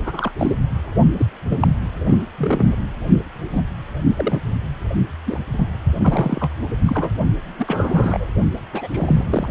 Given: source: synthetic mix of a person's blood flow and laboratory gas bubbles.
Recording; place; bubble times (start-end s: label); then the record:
Doppler ultrasound of blood flow; precordium
0.05-0.31 s: bubbles
0.38-0.52 s: bubbles
1.19-1.25 s: bubbles
1.49-1.68 s: bubbles
2.06-2.18 s: bubbles
2.38-2.75 s: bubbles
3.52-3.61 s: bubbles
4.09-4.39 s: bubbles
5.26-5.39 s: bubbles
5.58-5.65 s: bubbles
5.99-6.51 s: bubbles
6.85-7.10 s: bubbles
7.58-8.28 s: bubbles
8.73-8.88 s: bubbles
8.92-9.24 s: bubbles
9.29-9.49 s: bubbles
From the record:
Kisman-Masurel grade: 242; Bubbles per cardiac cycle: several, 3 to 8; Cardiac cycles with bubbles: 100%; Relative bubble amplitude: moderate (0.250 to 0.450); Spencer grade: 3 (all of the cardiac periods contain showers or single bubble signals, but not dominating or overriding the cardiac motion signals); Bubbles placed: only in the low amplitude regions of the cardiac cycle